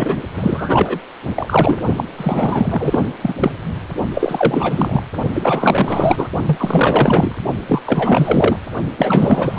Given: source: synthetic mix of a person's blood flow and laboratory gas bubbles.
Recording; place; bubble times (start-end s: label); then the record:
Doppler ultrasound of blood flow; precordium
0.00-0.22 s: bubbles
0.34-0.99 s: bubbles
1.34-1.81 s: bubbles
1.96-2.04 s: bubbles
2.17-3.06 s: bubbles
3.21-3.35 s: bubbles
3.40-3.52 s: bubbles
4.13-5.03 s: bubbles
5.33-6.28 s: bubbles
6.46-7.36 s: bubbles
7.68-7.81 s: bubbles
7.86-8.56 s: bubbles
8.97-9.58 s: bubbles
From the record:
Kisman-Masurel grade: 444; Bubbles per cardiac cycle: continuous sound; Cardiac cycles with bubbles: 100%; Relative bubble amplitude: maximal (0.775 to 0.999); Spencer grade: 4 (maximum detectable bubble signal sounding continuously throughout systole and diastole of every cardiac period, and overriding the amplitude of the normal cardiac signals); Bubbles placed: only in the low amplitude regions of the cardiac cycle